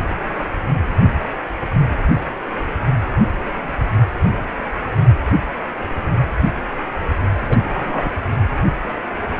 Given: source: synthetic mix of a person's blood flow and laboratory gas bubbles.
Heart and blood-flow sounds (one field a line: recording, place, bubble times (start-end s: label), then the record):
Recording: Doppler ultrasound of blood flow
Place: precordium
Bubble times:
7.49-7.57 s: bubbles
7.74-8.14 s: bubbles
From the record:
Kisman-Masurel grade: 112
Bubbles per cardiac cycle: 1 to 2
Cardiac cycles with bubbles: 1 to 10%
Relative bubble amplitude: moderate (0.250 to 0.450)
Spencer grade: 1 (occasional bubble signal discernible with the cardiac motion signal, with majority of cardiac periods free of bubbles)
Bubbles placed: anywhere in the cardiac cycle